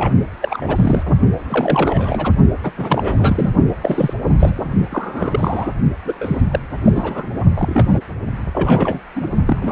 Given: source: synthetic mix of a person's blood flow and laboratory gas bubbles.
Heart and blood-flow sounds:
Doppler ultrasound of blood flow; precordium
0.00-0.14 s: bubbles
0.41-1.15 s: bubbles
1.49-2.33 s: bubbles
2.64-2.72 s: bubbles
2.77-3.50 s: bubbles
3.82-4.13 s: bubbles
4.39-4.72 s: bubbles
4.90-5.74 s: bubbles
6.05-6.41 s: bubbles
6.51-6.59 s: bubbles
6.86-7.29 s: bubbles
7.56-7.91 s: bubbles
7.94-8.02 s: bubbles
8.53-9.00 s: bubbles
9.15-9.27 s: bubbles
9.46-9.72 s: bubbles
From the record:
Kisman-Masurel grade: 342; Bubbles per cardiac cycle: rolling drumbeat, 9 or more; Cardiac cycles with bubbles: 100%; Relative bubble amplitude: moderate (0.250 to 0.450); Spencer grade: 3 (all of the cardiac periods contain showers or single bubble signals, but not dominating or overriding the cardiac motion signals); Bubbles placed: only in the low amplitude regions of the cardiac cycle

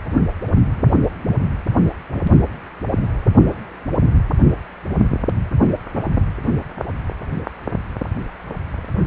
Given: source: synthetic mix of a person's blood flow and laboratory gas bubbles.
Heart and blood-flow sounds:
Doppler ultrasound of blood flow; precordium
no bubbles
From the record:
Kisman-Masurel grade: 000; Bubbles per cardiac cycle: 0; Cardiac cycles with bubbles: 0%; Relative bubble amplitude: no bubbles discernible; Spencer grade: 0 (complete lack of bubble signals)

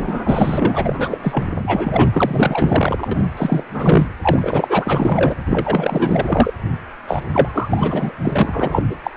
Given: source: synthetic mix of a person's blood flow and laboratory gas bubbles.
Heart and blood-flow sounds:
Doppler ultrasound of blood flow; precordium
0.00-1.18 s: bubbles
1.22-1.44 s: bubbles
1.54-3.08 s: bubbles
3.11-3.23 s: bubbles
3.36-3.64 s: bubbles
3.73-4.07 s: bubbles
4.22-5.34 s: bubbles
5.46-6.54 s: bubbles
7.08-7.22 s: bubbles
7.33-8.14 s: bubbles
8.21-8.83 s: bubbles
8.89-8.96 s: bubbles
9.04-9.10 s: bubbles
From the record:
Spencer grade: 4 (maximum detectable bubble signal sounding continuously throughout systole and diastole of every cardiac period, and overriding the amplitude of the normal cardiac signals); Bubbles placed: anywhere in the cardiac cycle

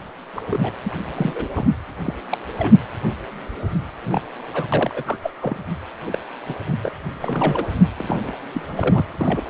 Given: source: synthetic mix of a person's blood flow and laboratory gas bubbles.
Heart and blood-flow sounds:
Doppler ultrasound of blood flow; precordium
0.36-0.41 s: bubbles
0.50-0.75 s: bubbles
0.84-0.91 s: bubbles
1.15-1.49 s: bubbles
1.55-1.67 s: bubbles
2.04-2.14 s: bubbles
2.31-2.38 s: bubbles
2.58-2.75 s: bubbles
4.06-4.21 s: bubbles
4.53-4.67 s: bubbles
4.72-5.03 s: bubbles
5.06-5.17 s: bubbles
5.22-5.31 s: bubbles
5.41-5.58 s: bubbles
6.06-6.18 s: bubbles
6.47-6.55 s: bubbles
6.67-6.75 s: bubbles
6.82-6.90 s: bubbles
7.20-7.64 s: bubbles
7.97-8.32 s: bubbles
8.54-9.04 s: bubbles
9.21-9.42 s: bubbles
From the record:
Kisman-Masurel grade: 242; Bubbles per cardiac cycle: several, 3 to 8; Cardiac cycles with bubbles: 100%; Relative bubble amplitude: moderate (0.250 to 0.450); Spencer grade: 3 (all of the cardiac periods contain showers or single bubble signals, but not dominating or overriding the cardiac motion signals); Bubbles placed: anywhere in the cardiac cycle

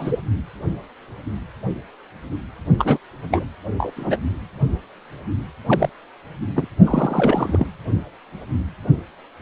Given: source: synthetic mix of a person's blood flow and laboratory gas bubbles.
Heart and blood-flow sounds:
Doppler ultrasound of blood flow; precordium
0.00-0.17 s: bubbles
2.78-2.97 s: bubbles
3.31-3.46 s: bubbles
3.77-3.93 s: bubbles
3.96-4.17 s: bubbles
5.66-5.90 s: bubbles
6.55-6.67 s: bubbles
6.86-7.67 s: bubbles
From the record:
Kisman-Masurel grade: 232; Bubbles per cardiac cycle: several, 3 to 8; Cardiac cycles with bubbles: 50 to 99%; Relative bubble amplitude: moderate (0.250 to 0.450); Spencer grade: 3 (all of the cardiac periods contain showers or single bubble signals, but not dominating or overriding the cardiac motion signals); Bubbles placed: anywhere in the cardiac cycle

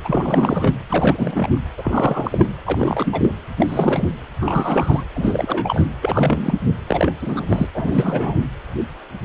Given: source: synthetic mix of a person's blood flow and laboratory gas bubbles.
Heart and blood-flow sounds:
Doppler ultrasound of blood flow; precordium
0.04-0.73 s: bubbles
0.89-1.58 s: bubbles
1.78-2.54 s: bubbles
2.66-3.35 s: bubbles
3.57-4.08 s: bubbles
4.39-5.04 s: bubbles
5.14-5.85 s: bubbles
6.01-6.62 s: bubbles
6.87-7.12 s: bubbles
7.21-7.46 s: bubbles
7.48-7.67 s: bubbles
7.75-8.40 s: bubbles
From the record:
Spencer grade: 3 (all of the cardiac periods contain showers or single bubble signals, but not dominating or overriding the cardiac motion signals); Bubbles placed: anywhere in the cardiac cycle

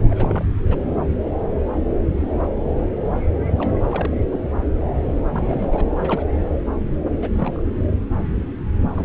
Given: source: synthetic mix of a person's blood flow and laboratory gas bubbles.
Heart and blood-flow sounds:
Doppler ultrasound of blood flow; subclavian vein
0.10-0.53 s: bubbles
0.70-0.76 s: bubbles
3.57-3.78 s: bubbles
3.84-4.16 s: bubbles
4.31-4.39 s: bubbles
5.26-5.86 s: bubbles
6.04-6.24 s: bubbles
7.21-7.29 s: bubbles
7.34-7.60 s: bubbles
8.96-9.05 s: bubbles
From the record:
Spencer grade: 2 (many but less than half of the cardiac periods contain bubble signals, singularly or in groups); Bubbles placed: anywhere in the cardiac cycle

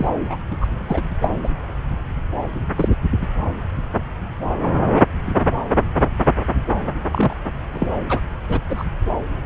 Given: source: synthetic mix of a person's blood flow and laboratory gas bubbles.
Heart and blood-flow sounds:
Doppler ultrasound of blood flow; subclavian vein
0.00-0.09 s: bubbles
0.30-0.37 s: bubbles
0.51-0.57 s: bubbles
0.60-0.68 s: bubbles
0.88-1.02 s: bubbles
1.22-1.28 s: bubbles
1.43-1.49 s: bubbles
2.76-2.95 s: bubbles
3.21-3.27 s: bubbles
7.12-7.35 s: bubbles
7.71-7.86 s: bubbles
8.09-8.20 s: bubbles
8.48-8.59 s: bubbles
8.69-8.84 s: bubbles
From the record:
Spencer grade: 3 (all of the cardiac periods contain showers or single bubble signals, but not dominating or overriding the cardiac motion signals); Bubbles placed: anywhere in the cardiac cycle

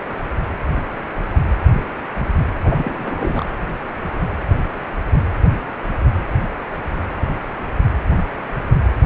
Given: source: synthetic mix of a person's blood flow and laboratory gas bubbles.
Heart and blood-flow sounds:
Doppler ultrasound of blood flow; precordium
2.63-3.46 s: bubbles
From the record:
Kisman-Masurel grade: 221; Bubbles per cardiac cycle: several, 3 to 8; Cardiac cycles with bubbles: 10 to 50%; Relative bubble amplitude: barely perceptible (0.100 to 0.250); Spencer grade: 2 (many but less than half of the cardiac periods contain bubble signals, singularly or in groups); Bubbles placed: anywhere in the cardiac cycle

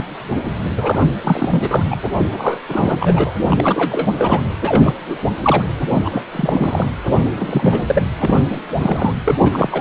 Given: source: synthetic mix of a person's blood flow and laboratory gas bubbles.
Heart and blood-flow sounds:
Doppler ultrasound of blood flow; precordium
0.00-0.04 s: bubbles
0.77-0.99 s: bubbles
1.23-1.84 s: bubbles
1.91-1.96 s: bubbles
2.17-2.61 s: bubbles
2.68-3.33 s: bubbles
3.39-4.08 s: bubbles
4.16-4.42 s: bubbles
4.62-4.93 s: bubbles
5.07-5.18 s: bubbles
5.42-5.63 s: bubbles
5.92-6.24 s: bubbles
6.31-6.88 s: bubbles
7.25-7.30 s: bubbles
7.36-7.83 s: bubbles
7.87-8.03 s: bubbles
8.20-8.40 s: bubbles
8.49-8.61 s: bubbles
8.79-9.13 s: bubbles
9.25-9.35 s: bubbles
9.39-9.81 s: bubbles
From the record:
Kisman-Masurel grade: 343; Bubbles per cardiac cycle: rolling drumbeat, 9 or more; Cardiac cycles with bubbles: 100%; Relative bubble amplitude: loud (0.450 to 0.775); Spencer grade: 3 (all of the cardiac periods contain showers or single bubble signals, but not dominating or overriding the cardiac motion signals); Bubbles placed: anywhere in the cardiac cycle

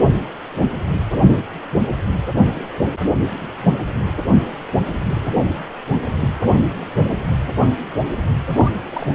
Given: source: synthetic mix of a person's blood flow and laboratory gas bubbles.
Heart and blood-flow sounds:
Doppler ultrasound of blood flow; precordium
8.47-8.72 s: bubbles
8.86-9.08 s: bubbles
From the record:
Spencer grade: 1 (occasional bubble signal discernible with the cardiac motion signal, with majority of cardiac periods free of bubbles); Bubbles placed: anywhere in the cardiac cycle

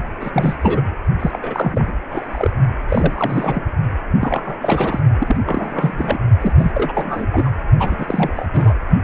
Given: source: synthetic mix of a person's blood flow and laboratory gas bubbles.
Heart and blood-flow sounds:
Doppler ultrasound of blood flow; precordium
0.21-0.57 s: bubbles
0.61-0.83 s: bubbles
1.19-1.39 s: bubbles
1.42-1.93 s: bubbles
2.10-2.50 s: bubbles
2.88-3.64 s: bubbles
4.21-5.00 s: bubbles
5.19-5.37 s: bubbles
5.46-6.19 s: bubbles
6.41-6.53 s: bubbles
6.58-6.71 s: bubbles
6.74-7.27 s: bubbles
7.33-7.50 s: bubbles
7.78-8.31 s: bubbles
8.36-8.48 s: bubbles
8.53-8.74 s: bubbles
From the record:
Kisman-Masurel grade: 332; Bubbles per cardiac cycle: rolling drumbeat, 9 or more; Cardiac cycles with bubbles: 50 to 99%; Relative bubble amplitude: moderate (0.250 to 0.450); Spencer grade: 3 (all of the cardiac periods contain showers or single bubble signals, but not dominating or overriding the cardiac motion signals); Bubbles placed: only in the low amplitude regions of the cardiac cycle

